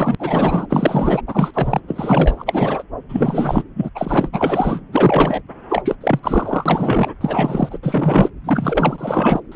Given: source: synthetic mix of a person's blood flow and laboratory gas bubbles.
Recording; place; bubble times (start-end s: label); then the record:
Doppler ultrasound of blood flow; subclavian vein
0.00-0.15 s: bubbles
0.19-0.67 s: bubbles
0.70-1.22 s: bubbles
1.27-1.51 s: bubbles
1.53-1.80 s: bubbles
1.88-2.83 s: bubbles
3.08-3.63 s: bubbles
3.75-3.89 s: bubbles
3.95-4.29 s: bubbles
4.32-4.80 s: bubbles
4.92-5.42 s: bubbles
5.69-5.95 s: bubbles
6.00-6.19 s: bubbles
6.23-7.08 s: bubbles
7.21-7.78 s: bubbles
7.83-8.29 s: bubbles
8.44-9.40 s: bubbles
9.52-9.56 s: bubbles
From the record:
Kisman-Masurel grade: 343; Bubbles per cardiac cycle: rolling drumbeat, 9 or more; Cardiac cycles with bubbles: 100%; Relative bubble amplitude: loud (0.450 to 0.775); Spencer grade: 3 (all of the cardiac periods contain showers or single bubble signals, but not dominating or overriding the cardiac motion signals); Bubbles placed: anywhere in the cardiac cycle